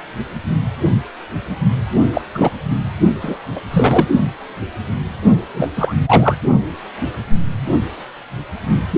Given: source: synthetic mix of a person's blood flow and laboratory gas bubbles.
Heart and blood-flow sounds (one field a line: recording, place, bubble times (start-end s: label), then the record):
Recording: Doppler ultrasound of blood flow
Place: precordium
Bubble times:
2.13-2.21 s: bubbles
2.35-2.51 s: bubbles
3.04-3.10 s: bubbles
3.21-3.38 s: bubbles
3.55-3.60 s: bubbles
3.70-4.08 s: bubbles
5.54-5.70 s: bubbles
5.76-5.95 s: bubbles
6.06-6.36 s: bubbles
From the record:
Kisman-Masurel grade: 223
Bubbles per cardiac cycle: several, 3 to 8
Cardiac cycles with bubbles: 10 to 50%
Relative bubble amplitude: loud (0.450 to 0.775)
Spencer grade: 2 (many but less than half of the cardiac periods contain bubble signals, singularly or in groups)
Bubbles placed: only in the low amplitude regions of the cardiac cycle